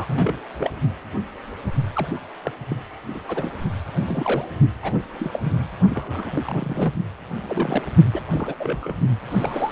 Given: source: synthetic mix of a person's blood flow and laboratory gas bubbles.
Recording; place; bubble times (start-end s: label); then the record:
Doppler ultrasound of blood flow; precordium
0.00-0.39 s: bubbles
0.57-0.71 s: bubbles
1.95-2.20 s: bubbles
2.43-2.52 s: bubbles
2.70-2.76 s: bubbles
3.14-3.22 s: bubbles
3.27-3.53 s: bubbles
3.95-4.46 s: bubbles
4.83-4.94 s: bubbles
5.20-5.39 s: bubbles
5.45-5.54 s: bubbles
5.90-6.32 s: bubbles
6.35-6.94 s: bubbles
7.47-7.83 s: bubbles
8.13-8.21 s: bubbles
8.30-8.55 s: bubbles
8.59-8.93 s: bubbles
9.30-9.72 s: bubbles
From the record:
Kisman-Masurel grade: 232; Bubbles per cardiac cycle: several, 3 to 8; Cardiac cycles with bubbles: 50 to 99%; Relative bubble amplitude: moderate (0.250 to 0.450); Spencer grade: 3 (all of the cardiac periods contain showers or single bubble signals, but not dominating or overriding the cardiac motion signals); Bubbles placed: only in the low amplitude regions of the cardiac cycle